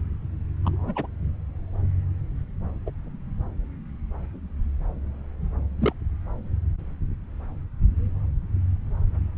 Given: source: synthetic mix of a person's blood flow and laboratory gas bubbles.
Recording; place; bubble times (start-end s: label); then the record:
Doppler ultrasound of blood flow; subclavian vein
0.64-1.06 s: bubbles
2.86-2.90 s: bubbles
5.81-5.92 s: bubbles
From the record:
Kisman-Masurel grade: 121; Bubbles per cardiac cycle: 1 to 2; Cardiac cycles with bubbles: 10 to 50%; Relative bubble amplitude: barely perceptible (0.100 to 0.250); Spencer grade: 2 (many but less than half of the cardiac periods contain bubble signals, singularly or in groups); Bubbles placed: anywhere in the cardiac cycle